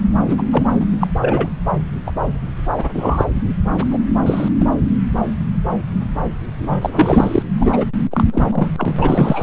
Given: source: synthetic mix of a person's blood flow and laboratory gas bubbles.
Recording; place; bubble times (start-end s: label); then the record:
Doppler ultrasound of blood flow; subclavian vein
0.27-0.42 s: bubbles
0.51-0.64 s: bubbles
0.80-0.85 s: bubbles
1.00-1.07 s: bubbles
1.21-1.49 s: bubbles
2.06-2.12 s: bubbles
2.77-2.90 s: bubbles
2.94-3.25 s: bubbles
3.80-3.98 s: bubbles
4.26-4.48 s: bubbles
4.58-4.68 s: bubbles
6.59-7.42 s: bubbles
7.59-7.85 s: bubbles
8.11-8.24 s: bubbles
8.32-8.70 s: bubbles
8.78-9.43 s: bubbles
From the record:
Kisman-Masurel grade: 233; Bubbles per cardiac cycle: several, 3 to 8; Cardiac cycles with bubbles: 50 to 99%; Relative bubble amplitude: loud (0.450 to 0.775); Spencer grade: 3 (all of the cardiac periods contain showers or single bubble signals, but not dominating or overriding the cardiac motion signals); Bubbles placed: anywhere in the cardiac cycle